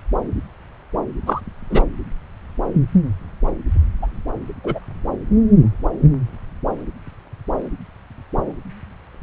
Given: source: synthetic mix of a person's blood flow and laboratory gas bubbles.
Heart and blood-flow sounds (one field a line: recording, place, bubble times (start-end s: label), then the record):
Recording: Doppler ultrasound of blood flow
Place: subclavian vein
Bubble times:
1.26-1.41 s: bubbles
1.70-1.82 s: bubbles
4.02-4.08 s: bubbles
4.64-4.79 s: bubbles
From the record:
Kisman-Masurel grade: 123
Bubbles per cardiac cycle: 1 to 2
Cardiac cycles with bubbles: 10 to 50%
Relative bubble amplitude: loud (0.450 to 0.775)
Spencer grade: 2 (many but less than half of the cardiac periods contain bubble signals, singularly or in groups)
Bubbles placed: anywhere in the cardiac cycle